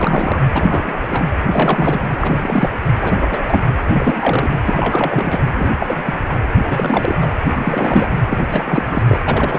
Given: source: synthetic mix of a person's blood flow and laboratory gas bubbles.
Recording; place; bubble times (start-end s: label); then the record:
Doppler ultrasound of blood flow; precordium
0.00-0.42 s: bubbles
0.53-0.98 s: bubbles
1.02-1.24 s: bubbles
1.53-2.00 s: bubbles
2.21-2.70 s: bubbles
2.99-3.39 s: bubbles
3.44-3.65 s: bubbles
3.87-4.58 s: bubbles
4.66-5.42 s: bubbles
5.55-5.71 s: bubbles
5.79-6.14 s: bubbles
6.28-6.37 s: bubbles
6.57-6.63 s: bubbles
6.69-7.15 s: bubbles
7.20-7.28 s: bubbles
7.50-8.11 s: bubbles
8.29-8.39 s: bubbles
8.49-9.03 s: bubbles
9.07-9.18 s: bubbles
9.28-9.59 s: bubbles
From the record:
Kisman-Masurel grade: 342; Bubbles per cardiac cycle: rolling drumbeat, 9 or more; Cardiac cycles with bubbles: 100%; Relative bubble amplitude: moderate (0.250 to 0.450); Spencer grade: 3 (all of the cardiac periods contain showers or single bubble signals, but not dominating or overriding the cardiac motion signals); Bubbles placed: anywhere in the cardiac cycle